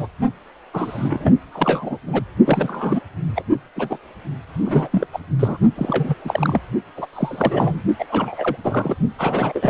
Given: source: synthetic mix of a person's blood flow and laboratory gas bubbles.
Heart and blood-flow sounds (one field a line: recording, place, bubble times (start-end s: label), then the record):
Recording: Doppler ultrasound of blood flow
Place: precordium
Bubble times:
0.00-0.08 s: bubbles
0.73-1.32 s: bubbles
1.52-1.97 s: bubbles
2.06-2.23 s: bubbles
2.45-3.01 s: bubbles
3.35-3.42 s: bubbles
3.75-3.97 s: bubbles
4.65-4.88 s: bubbles
4.92-5.06 s: bubbles
5.12-5.20 s: bubbles
5.39-5.58 s: bubbles
5.75-6.14 s: bubbles
6.24-6.60 s: bubbles
6.96-7.06 s: bubbles
7.13-7.81 s: bubbles
7.99-8.05 s: bubbles
8.09-8.56 s: bubbles
8.62-8.96 s: bubbles
9.18-9.70 s: bubbles
From the record:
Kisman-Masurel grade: 342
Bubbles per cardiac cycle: rolling drumbeat, 9 or more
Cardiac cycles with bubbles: 100%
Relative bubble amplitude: moderate (0.250 to 0.450)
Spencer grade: 3 (all of the cardiac periods contain showers or single bubble signals, but not dominating or overriding the cardiac motion signals)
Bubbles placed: only in the low amplitude regions of the cardiac cycle